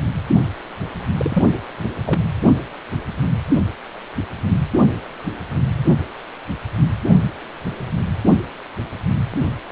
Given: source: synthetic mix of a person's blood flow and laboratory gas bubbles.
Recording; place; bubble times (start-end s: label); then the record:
Doppler ultrasound of blood flow; precordium
1.17-1.43 s: bubbles
2.06-2.21 s: bubbles
From the record:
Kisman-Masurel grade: 112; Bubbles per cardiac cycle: 1 to 2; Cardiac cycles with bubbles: 1 to 10%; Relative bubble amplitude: moderate (0.250 to 0.450); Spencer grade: 1 (occasional bubble signal discernible with the cardiac motion signal, with majority of cardiac periods free of bubbles); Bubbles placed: only in the low amplitude regions of the cardiac cycle